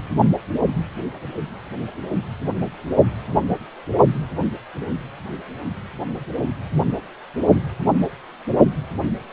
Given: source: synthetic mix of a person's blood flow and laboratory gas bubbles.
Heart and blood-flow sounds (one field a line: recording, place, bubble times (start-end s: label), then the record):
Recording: Doppler ultrasound of blood flow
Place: precordium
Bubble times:
no bubbles
From the record:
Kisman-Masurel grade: 000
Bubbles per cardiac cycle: 0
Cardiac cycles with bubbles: 0%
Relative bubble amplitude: no bubbles discernible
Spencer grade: 0 (complete lack of bubble signals)